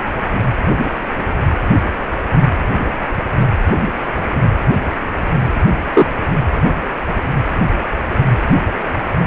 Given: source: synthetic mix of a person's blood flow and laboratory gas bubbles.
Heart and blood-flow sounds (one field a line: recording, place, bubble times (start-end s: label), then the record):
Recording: Doppler ultrasound of blood flow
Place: precordium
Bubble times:
5.95-6.07 s: bubbles
From the record:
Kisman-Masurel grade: 123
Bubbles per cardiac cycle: 1 to 2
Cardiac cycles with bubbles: 10 to 50%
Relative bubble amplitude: loud (0.450 to 0.775)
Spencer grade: 2 (many but less than half of the cardiac periods contain bubble signals, singularly or in groups)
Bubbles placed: anywhere in the cardiac cycle